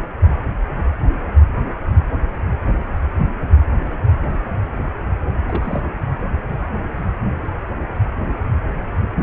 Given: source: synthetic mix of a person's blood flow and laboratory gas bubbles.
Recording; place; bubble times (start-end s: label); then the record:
Doppler ultrasound of blood flow; precordium
5.47-5.91 s: bubbles
From the record:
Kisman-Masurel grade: 211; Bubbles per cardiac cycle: several, 3 to 8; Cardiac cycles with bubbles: 1 to 10%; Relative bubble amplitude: barely perceptible (0.100 to 0.250); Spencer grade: 1 (occasional bubble signal discernible with the cardiac motion signal, with majority of cardiac periods free of bubbles); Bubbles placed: anywhere in the cardiac cycle